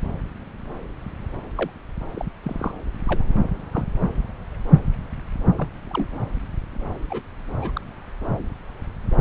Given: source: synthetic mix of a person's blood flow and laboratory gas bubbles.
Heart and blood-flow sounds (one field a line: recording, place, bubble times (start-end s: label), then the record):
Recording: Doppler ultrasound of blood flow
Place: subclavian vein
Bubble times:
1.55-1.71 s: bubbles
2.14-2.25 s: bubbles
2.42-2.71 s: bubbles
3.07-3.25 s: bubbles
3.71-3.85 s: bubbles
5.58-5.68 s: bubbles
5.90-6.07 s: bubbles
7.10-7.23 s: bubbles
7.59-7.81 s: bubbles
From the record:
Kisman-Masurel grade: 121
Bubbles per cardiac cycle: 1 to 2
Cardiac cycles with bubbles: 10 to 50%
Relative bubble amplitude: barely perceptible (0.100 to 0.250)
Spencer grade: 2 (many but less than half of the cardiac periods contain bubble signals, singularly or in groups)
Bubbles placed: anywhere in the cardiac cycle